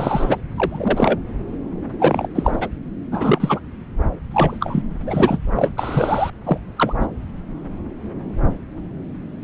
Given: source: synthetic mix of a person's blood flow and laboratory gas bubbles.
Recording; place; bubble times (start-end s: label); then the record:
Doppler ultrasound of blood flow; subclavian vein
0.00-0.36 s: bubbles
0.54-1.19 s: bubbles
1.99-2.28 s: bubbles
2.34-2.68 s: bubbles
3.12-3.60 s: bubbles
4.31-4.82 s: bubbles
5.06-5.39 s: bubbles
5.55-5.70 s: bubbles
5.77-6.31 s: bubbles
6.45-6.58 s: bubbles
6.76-6.93 s: bubbles
7.00-7.07 s: bubbles
From the record:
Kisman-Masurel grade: 233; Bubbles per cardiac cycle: several, 3 to 8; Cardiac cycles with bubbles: 50 to 99%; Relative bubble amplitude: loud (0.450 to 0.775); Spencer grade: 3 (all of the cardiac periods contain showers or single bubble signals, but not dominating or overriding the cardiac motion signals); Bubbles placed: anywhere in the cardiac cycle